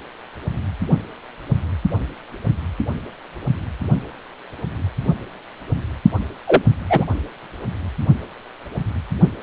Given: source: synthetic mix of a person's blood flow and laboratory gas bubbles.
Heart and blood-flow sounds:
Doppler ultrasound of blood flow; precordium
6.46-6.61 s: bubbles
6.89-7.04 s: bubbles
From the record:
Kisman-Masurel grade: 113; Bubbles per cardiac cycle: 1 to 2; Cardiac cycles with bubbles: 1 to 10%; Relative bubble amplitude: loud (0.450 to 0.775); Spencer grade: 1 (occasional bubble signal discernible with the cardiac motion signal, with majority of cardiac periods free of bubbles); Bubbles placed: only in the low amplitude regions of the cardiac cycle

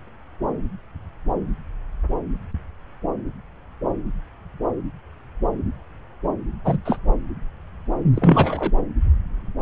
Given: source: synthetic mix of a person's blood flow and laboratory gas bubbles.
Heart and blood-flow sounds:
Doppler ultrasound of blood flow; subclavian vein
6.64-6.78 s: bubbles
6.85-6.97 s: bubbles
8.14-8.72 s: bubbles
From the record:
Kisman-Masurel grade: 213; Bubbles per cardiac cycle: several, 3 to 8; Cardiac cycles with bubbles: 1 to 10%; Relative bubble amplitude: loud (0.450 to 0.775); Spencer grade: 1 (occasional bubble signal discernible with the cardiac motion signal, with majority of cardiac periods free of bubbles); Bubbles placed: anywhere in the cardiac cycle

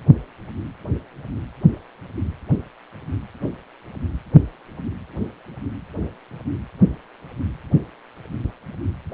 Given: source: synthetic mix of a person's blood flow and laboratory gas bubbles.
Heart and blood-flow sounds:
Doppler ultrasound of blood flow; precordium
no bubbles
From the record:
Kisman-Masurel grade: 000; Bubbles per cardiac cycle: 0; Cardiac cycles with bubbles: 0%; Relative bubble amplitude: no bubbles discernible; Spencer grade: 0 (complete lack of bubble signals)

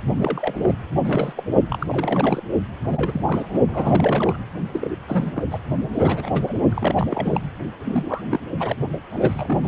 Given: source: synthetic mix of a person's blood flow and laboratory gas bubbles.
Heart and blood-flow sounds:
Doppler ultrasound of blood flow; precordium
0.16-0.74 s: bubbles
1.05-1.33 s: bubbles
1.36-1.43 s: bubbles
1.69-2.44 s: bubbles
2.83-3.58 s: bubbles
3.67-4.38 s: bubbles
4.72-4.96 s: bubbles
5.07-5.43 s: bubbles
5.50-5.59 s: bubbles
5.94-6.60 s: bubbles
6.69-7.41 s: bubbles
7.84-8.21 s: bubbles
8.30-8.40 s: bubbles
8.57-8.77 s: bubbles
9.10-9.68 s: bubbles
From the record:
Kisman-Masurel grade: 342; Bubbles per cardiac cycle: rolling drumbeat, 9 or more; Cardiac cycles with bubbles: 100%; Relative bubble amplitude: moderate (0.250 to 0.450); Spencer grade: 3 (all of the cardiac periods contain showers or single bubble signals, but not dominating or overriding the cardiac motion signals); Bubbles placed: only in the low amplitude regions of the cardiac cycle

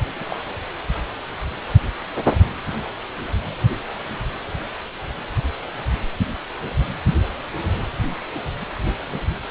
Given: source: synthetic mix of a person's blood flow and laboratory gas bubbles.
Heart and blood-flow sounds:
Doppler ultrasound of blood flow; precordium
0.16-0.24 s: bubbles
0.29-0.36 s: bubbles
From the record:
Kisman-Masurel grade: 121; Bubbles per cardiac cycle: 1 to 2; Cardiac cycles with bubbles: 10 to 50%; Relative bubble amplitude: barely perceptible (0.100 to 0.250); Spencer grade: 2 (many but less than half of the cardiac periods contain bubble signals, singularly or in groups); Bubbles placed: anywhere in the cardiac cycle

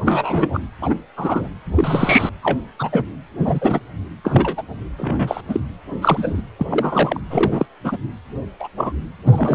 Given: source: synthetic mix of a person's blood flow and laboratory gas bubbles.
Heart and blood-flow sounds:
Doppler ultrasound of blood flow; precordium
0.04-0.62 s: bubbles
0.80-0.95 s: bubbles
1.17-1.49 s: bubbles
1.75-2.29 s: bubbles
2.42-2.59 s: bubbles
2.79-2.89 s: bubbles
2.92-3.04 s: bubbles
3.44-3.79 s: bubbles
4.24-4.63 s: bubbles
4.97-5.41 s: bubbles
5.48-5.60 s: bubbles
6.01-6.42 s: bubbles
6.58-7.20 s: bubbles
7.30-7.66 s: bubbles
7.84-7.98 s: bubbles
8.60-8.68 s: bubbles
8.77-8.92 s: bubbles
9.25-9.55 s: bubbles
From the record:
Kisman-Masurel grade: 233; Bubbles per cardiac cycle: several, 3 to 8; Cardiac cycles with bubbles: 50 to 99%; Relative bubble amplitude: loud (0.450 to 0.775); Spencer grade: 3 (all of the cardiac periods contain showers or single bubble signals, but not dominating or overriding the cardiac motion signals); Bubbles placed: anywhere in the cardiac cycle

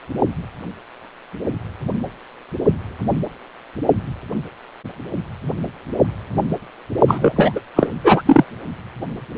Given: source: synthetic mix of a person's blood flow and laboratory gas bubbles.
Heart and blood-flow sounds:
Doppler ultrasound of blood flow; precordium
7.08-7.33 s: bubbles
7.36-7.53 s: bubbles
7.55-7.60 s: bubbles
7.76-7.89 s: bubbles
8.04-8.22 s: bubbles
8.26-8.45 s: bubbles
From the record:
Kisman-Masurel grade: 213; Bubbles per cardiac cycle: several, 3 to 8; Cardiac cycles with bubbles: 1 to 10%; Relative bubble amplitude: loud (0.450 to 0.775); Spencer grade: 1 (occasional bubble signal discernible with the cardiac motion signal, with majority of cardiac periods free of bubbles); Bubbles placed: only in the low amplitude regions of the cardiac cycle

